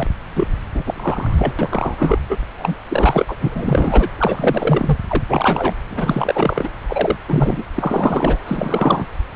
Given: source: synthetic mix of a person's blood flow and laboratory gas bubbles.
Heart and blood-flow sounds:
Doppler ultrasound of blood flow; subclavian vein
0.00-0.07 s: bubbles
0.35-0.47 s: bubbles
0.74-0.83 s: bubbles
0.86-1.54 s: bubbles
1.58-2.18 s: bubbles
2.29-2.37 s: bubbles
2.58-2.75 s: bubbles
2.88-3.35 s: bubbles
3.41-4.08 s: bubbles
4.17-4.98 s: bubbles
5.08-5.24 s: bubbles
5.29-5.74 s: bubbles
5.91-6.71 s: bubbles
6.88-7.16 s: bubbles
7.28-7.63 s: bubbles
7.74-8.41 s: bubbles
8.46-9.07 s: bubbles
From the record:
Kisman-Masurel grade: 343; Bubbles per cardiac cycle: rolling drumbeat, 9 or more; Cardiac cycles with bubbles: 100%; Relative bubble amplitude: loud (0.450 to 0.775); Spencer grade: 3 (all of the cardiac periods contain showers or single bubble signals, but not dominating or overriding the cardiac motion signals); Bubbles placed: anywhere in the cardiac cycle

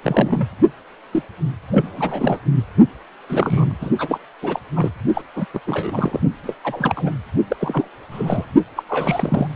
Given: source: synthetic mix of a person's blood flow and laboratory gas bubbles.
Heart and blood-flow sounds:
Doppler ultrasound of blood flow; precordium
0.02-0.48 s: bubbles
1.12-1.23 s: bubbles
1.71-2.38 s: bubbles
3.29-3.77 s: bubbles
3.81-3.90 s: bubbles
3.98-4.18 s: bubbles
4.42-4.59 s: bubbles
4.75-4.91 s: bubbles
5.14-5.21 s: bubbles
5.35-5.46 s: bubbles
5.53-5.60 s: bubbles
5.67-6.20 s: bubbles
6.43-6.54 s: bubbles
6.63-7.11 s: bubbles
7.49-7.56 s: bubbles
7.61-7.89 s: bubbles
8.11-8.46 s: bubbles
8.76-8.83 s: bubbles
8.88-9.47 s: bubbles
From the record:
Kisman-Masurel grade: 342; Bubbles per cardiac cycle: rolling drumbeat, 9 or more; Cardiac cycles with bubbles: 100%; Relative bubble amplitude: moderate (0.250 to 0.450); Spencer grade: 3 (all of the cardiac periods contain showers or single bubble signals, but not dominating or overriding the cardiac motion signals); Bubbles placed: only in the low amplitude regions of the cardiac cycle

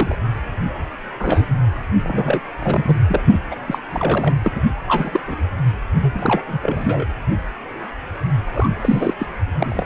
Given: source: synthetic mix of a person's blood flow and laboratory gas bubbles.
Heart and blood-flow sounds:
Doppler ultrasound of blood flow; precordium
0.00-0.15 s: bubbles
1.19-1.45 s: bubbles
2.03-2.40 s: bubbles
2.59-2.97 s: bubbles
3.07-3.21 s: bubbles
3.26-3.40 s: bubbles
3.50-3.56 s: bubbles
3.66-3.79 s: bubbles
3.91-4.33 s: bubbles
4.44-4.52 s: bubbles
4.55-4.60 s: bubbles
4.87-5.21 s: bubbles
5.28-5.36 s: bubbles
6.01-6.42 s: bubbles
6.48-6.58 s: bubbles
6.62-7.06 s: bubbles
8.54-8.69 s: bubbles
8.82-9.14 s: bubbles
9.19-9.27 s: bubbles
9.59-9.86 s: bubbles
From the record:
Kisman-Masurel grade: 232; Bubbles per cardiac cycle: several, 3 to 8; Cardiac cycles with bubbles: 50 to 99%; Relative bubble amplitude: moderate (0.250 to 0.450); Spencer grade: 3 (all of the cardiac periods contain showers or single bubble signals, but not dominating or overriding the cardiac motion signals); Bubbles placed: anywhere in the cardiac cycle

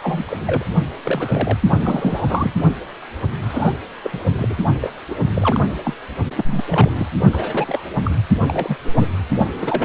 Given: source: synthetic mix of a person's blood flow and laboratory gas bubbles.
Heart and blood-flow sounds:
Doppler ultrasound of blood flow; precordium
0.03-0.24 s: bubbles
0.27-0.38 s: bubbles
0.41-0.64 s: bubbles
1.04-1.58 s: bubbles
1.70-2.53 s: bubbles
3.41-3.74 s: bubbles
4.03-4.11 s: bubbles
4.13-4.24 s: bubbles
4.37-4.90 s: bubbles
5.09-5.15 s: bubbles
5.35-5.61 s: bubbles
5.83-5.94 s: bubbles
6.36-6.64 s: bubbles
6.69-7.07 s: bubbles
7.31-7.83 s: bubbles
8.04-8.11 s: bubbles
8.44-8.77 s: bubbles
8.96-9.06 s: bubbles
9.37-9.48 s: bubbles
9.60-9.85 s: bubbles
From the record:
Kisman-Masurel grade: 242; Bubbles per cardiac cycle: several, 3 to 8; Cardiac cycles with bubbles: 100%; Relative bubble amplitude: moderate (0.250 to 0.450); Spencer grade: 3 (all of the cardiac periods contain showers or single bubble signals, but not dominating or overriding the cardiac motion signals); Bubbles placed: only in the low amplitude regions of the cardiac cycle

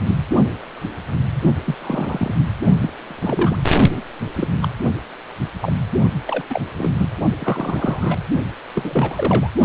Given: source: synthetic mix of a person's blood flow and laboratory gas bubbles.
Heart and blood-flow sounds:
Doppler ultrasound of blood flow; precordium
0.07-0.15 s: bubbles
1.65-1.75 s: bubbles
1.81-2.35 s: bubbles
2.82-2.91 s: bubbles
3.07-3.56 s: bubbles
3.92-4.03 s: bubbles
4.36-4.50 s: bubbles
4.62-4.68 s: bubbles
5.62-5.73 s: bubbles
6.25-6.45 s: bubbles
6.50-6.62 s: bubbles
6.76-6.91 s: bubbles
6.98-7.10 s: bubbles
7.38-8.21 s: bubbles
8.75-9.50 s: bubbles
From the record:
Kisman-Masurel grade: 232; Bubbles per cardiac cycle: several, 3 to 8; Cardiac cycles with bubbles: 50 to 99%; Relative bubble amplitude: moderate (0.250 to 0.450); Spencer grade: 3 (all of the cardiac periods contain showers or single bubble signals, but not dominating or overriding the cardiac motion signals); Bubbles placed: only in the low amplitude regions of the cardiac cycle

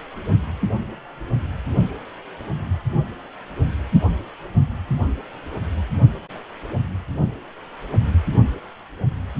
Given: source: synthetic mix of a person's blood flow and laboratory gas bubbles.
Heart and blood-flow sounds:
Doppler ultrasound of blood flow; precordium
no bubbles
From the record:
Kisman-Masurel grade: 000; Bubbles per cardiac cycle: 0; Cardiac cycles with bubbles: 0%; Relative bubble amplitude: no bubbles discernible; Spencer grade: 0 (complete lack of bubble signals)

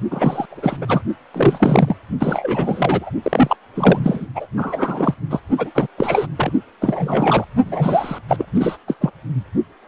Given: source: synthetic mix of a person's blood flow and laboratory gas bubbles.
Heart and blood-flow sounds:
Doppler ultrasound of blood flow; precordium
0.10-0.46 s: bubbles
0.51-0.77 s: bubbles
0.81-1.01 s: bubbles
1.34-1.95 s: bubbles
2.20-3.10 s: bubbles
3.23-3.57 s: bubbles
3.74-4.27 s: bubbles
4.35-4.46 s: bubbles
4.57-5.14 s: bubbles
5.30-5.40 s: bubbles
5.58-5.71 s: bubbles
5.75-5.87 s: bubbles
5.98-6.27 s: bubbles
6.37-6.52 s: bubbles
6.81-7.45 s: bubbles
7.65-8.18 s: bubbles
8.28-8.46 s: bubbles
8.54-8.77 s: bubbles
8.88-8.94 s: bubbles
9.00-9.10 s: bubbles
From the record:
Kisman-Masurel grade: 333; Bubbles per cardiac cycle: rolling drumbeat, 9 or more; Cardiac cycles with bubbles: 50 to 99%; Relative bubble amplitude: loud (0.450 to 0.775); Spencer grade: 3 (all of the cardiac periods contain showers or single bubble signals, but not dominating or overriding the cardiac motion signals); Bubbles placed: only in the low amplitude regions of the cardiac cycle

